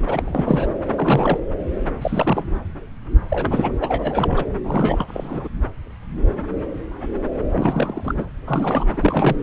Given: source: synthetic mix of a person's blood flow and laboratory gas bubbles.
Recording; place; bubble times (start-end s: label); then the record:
Doppler ultrasound of blood flow; subclavian vein
0.06-0.67 s: bubbles
0.96-1.40 s: bubbles
2.02-2.46 s: bubbles
3.28-3.73 s: bubbles
3.80-4.45 s: bubbles
4.64-5.48 s: bubbles
7.51-8.25 s: bubbles
8.47-8.86 s: bubbles
8.92-9.36 s: bubbles
From the record:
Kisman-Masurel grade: 333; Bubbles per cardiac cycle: rolling drumbeat, 9 or more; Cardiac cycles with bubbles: 50 to 99%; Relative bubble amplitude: loud (0.450 to 0.775); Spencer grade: 3 (all of the cardiac periods contain showers or single bubble signals, but not dominating or overriding the cardiac motion signals); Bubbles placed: anywhere in the cardiac cycle